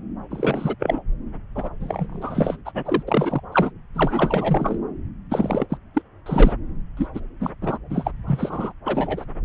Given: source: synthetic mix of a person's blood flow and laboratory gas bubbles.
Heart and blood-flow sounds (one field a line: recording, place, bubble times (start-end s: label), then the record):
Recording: Doppler ultrasound of blood flow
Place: subclavian vein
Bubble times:
0.30-0.75 s: bubbles
0.79-1.02 s: bubbles
1.55-1.70 s: bubbles
1.80-2.57 s: bubbles
2.65-2.71 s: bubbles
2.74-3.03 s: bubbles
3.07-3.40 s: bubbles
3.52-3.71 s: bubbles
3.94-4.79 s: bubbles
5.30-5.66 s: bubbles
5.70-5.78 s: bubbles
5.95-6.02 s: bubbles
6.26-6.53 s: bubbles
6.97-7.08 s: bubbles
7.15-7.20 s: bubbles
7.41-7.50 s: bubbles
7.62-7.78 s: bubbles
7.89-8.12 s: bubbles
8.28-8.72 s: bubbles
8.85-9.25 s: bubbles
From the record:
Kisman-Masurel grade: 342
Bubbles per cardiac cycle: rolling drumbeat, 9 or more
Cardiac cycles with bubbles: 100%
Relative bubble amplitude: moderate (0.250 to 0.450)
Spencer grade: 3 (all of the cardiac periods contain showers or single bubble signals, but not dominating or overriding the cardiac motion signals)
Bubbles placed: anywhere in the cardiac cycle